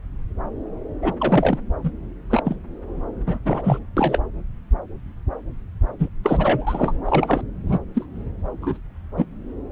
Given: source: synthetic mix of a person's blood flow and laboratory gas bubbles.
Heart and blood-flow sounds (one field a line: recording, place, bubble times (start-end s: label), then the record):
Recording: Doppler ultrasound of blood flow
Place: subclavian vein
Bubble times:
1.02-1.13 s: bubbles
1.20-1.58 s: bubbles
1.83-1.91 s: bubbles
2.30-2.41 s: bubbles
2.45-2.56 s: bubbles
3.27-3.39 s: bubbles
3.45-3.79 s: bubbles
3.96-4.19 s: bubbles
5.99-6.08 s: bubbles
6.23-6.98 s: bubbles
7.05-7.41 s: bubbles
7.66-7.79 s: bubbles
7.94-8.05 s: bubbles
8.60-8.77 s: bubbles
9.16-9.25 s: bubbles
From the record:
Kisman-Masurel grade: 232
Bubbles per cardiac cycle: several, 3 to 8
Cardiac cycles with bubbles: 50 to 99%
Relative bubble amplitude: moderate (0.250 to 0.450)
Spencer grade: 3 (all of the cardiac periods contain showers or single bubble signals, but not dominating or overriding the cardiac motion signals)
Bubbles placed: anywhere in the cardiac cycle